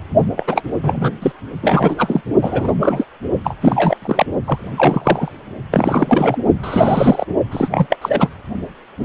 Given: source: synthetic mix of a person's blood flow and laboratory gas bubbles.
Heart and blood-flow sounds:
Doppler ultrasound of blood flow; precordium
0.36-0.62 s: bubbles
0.83-1.12 s: bubbles
1.22-1.32 s: bubbles
1.62-2.21 s: bubbles
2.42-2.71 s: bubbles
2.80-3.04 s: bubbles
3.44-3.55 s: bubbles
3.61-3.97 s: bubbles
4.01-4.26 s: bubbles
4.44-4.68 s: bubbles
4.77-5.32 s: bubbles
5.71-6.38 s: bubbles
6.63-7.25 s: bubbles
7.51-7.86 s: bubbles
7.90-7.97 s: bubbles
8.01-8.29 s: bubbles
From the record:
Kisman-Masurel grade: 333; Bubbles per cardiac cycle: rolling drumbeat, 9 or more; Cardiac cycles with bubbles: 50 to 99%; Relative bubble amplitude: loud (0.450 to 0.775); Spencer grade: 3 (all of the cardiac periods contain showers or single bubble signals, but not dominating or overriding the cardiac motion signals); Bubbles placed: only in the low amplitude regions of the cardiac cycle

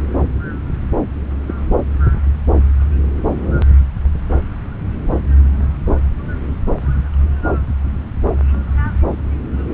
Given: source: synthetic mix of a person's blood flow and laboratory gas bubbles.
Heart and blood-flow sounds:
Doppler ultrasound of blood flow; subclavian vein
1.48-1.54 s: bubbles
From the record:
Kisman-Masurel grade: 112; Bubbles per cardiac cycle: 1 to 2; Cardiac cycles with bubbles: 1 to 10%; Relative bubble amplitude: moderate (0.250 to 0.450); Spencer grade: 1 (occasional bubble signal discernible with the cardiac motion signal, with majority of cardiac periods free of bubbles); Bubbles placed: anywhere in the cardiac cycle

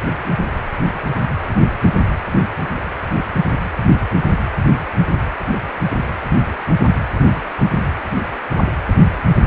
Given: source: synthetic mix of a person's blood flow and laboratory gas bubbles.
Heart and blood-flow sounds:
Doppler ultrasound of blood flow; precordium
no bubbles
From the record:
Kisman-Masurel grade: 000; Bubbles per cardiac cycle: 0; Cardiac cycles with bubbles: 0%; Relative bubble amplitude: no bubbles discernible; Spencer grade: 0 (complete lack of bubble signals)

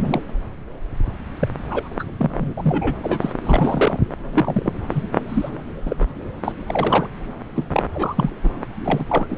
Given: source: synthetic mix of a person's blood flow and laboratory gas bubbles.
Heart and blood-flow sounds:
Doppler ultrasound of blood flow; subclavian vein
0.07-0.21 s: bubbles
1.40-1.48 s: bubbles
1.66-1.89 s: bubbles
1.99-2.03 s: bubbles
2.19-2.54 s: bubbles
2.57-2.96 s: bubbles
3.03-3.33 s: bubbles
3.44-3.99 s: bubbles
4.33-4.73 s: bubbles
4.90-5.02 s: bubbles
5.29-5.50 s: bubbles
5.85-5.96 s: bubbles
6.00-6.05 s: bubbles
6.44-6.52 s: bubbles
6.67-7.09 s: bubbles
7.55-7.67 s: bubbles
7.72-7.83 s: bubbles
7.94-8.30 s: bubbles
8.43-8.53 s: bubbles
8.84-9.04 s: bubbles
9.08-9.26 s: bubbles
9.29-9.38 s: bubbles
From the record:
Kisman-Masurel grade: 242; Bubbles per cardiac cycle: several, 3 to 8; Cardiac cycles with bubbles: 100%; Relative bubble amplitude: moderate (0.250 to 0.450); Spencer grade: 3 (all of the cardiac periods contain showers or single bubble signals, but not dominating or overriding the cardiac motion signals); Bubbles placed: anywhere in the cardiac cycle

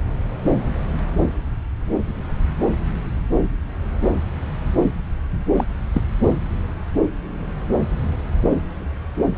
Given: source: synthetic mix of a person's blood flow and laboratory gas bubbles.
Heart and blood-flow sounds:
Doppler ultrasound of blood flow; subclavian vein
5.56-5.64 s: bubbles
5.92-6.02 s: bubbles
From the record:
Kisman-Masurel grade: 112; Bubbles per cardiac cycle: 1 to 2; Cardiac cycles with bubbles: 1 to 10%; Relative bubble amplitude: moderate (0.250 to 0.450); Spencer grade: 1 (occasional bubble signal discernible with the cardiac motion signal, with majority of cardiac periods free of bubbles); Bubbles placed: anywhere in the cardiac cycle

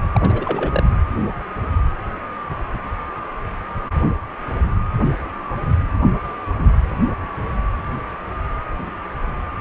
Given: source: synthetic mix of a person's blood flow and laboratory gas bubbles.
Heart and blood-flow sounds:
Doppler ultrasound of blood flow; precordium
0.14-0.83 s: bubbles
From the record:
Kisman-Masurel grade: 212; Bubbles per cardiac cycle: several, 3 to 8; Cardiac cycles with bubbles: 1 to 10%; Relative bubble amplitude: moderate (0.250 to 0.450); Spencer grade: 1 (occasional bubble signal discernible with the cardiac motion signal, with majority of cardiac periods free of bubbles); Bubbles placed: anywhere in the cardiac cycle

